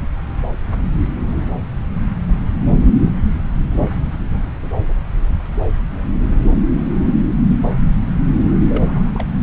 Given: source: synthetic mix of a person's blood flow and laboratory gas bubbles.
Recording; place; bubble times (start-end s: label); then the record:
Doppler ultrasound of blood flow; subclavian vein
8.68-9.25 s: bubbles
From the record:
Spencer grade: 1 (occasional bubble signal discernible with the cardiac motion signal, with majority of cardiac periods free of bubbles); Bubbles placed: anywhere in the cardiac cycle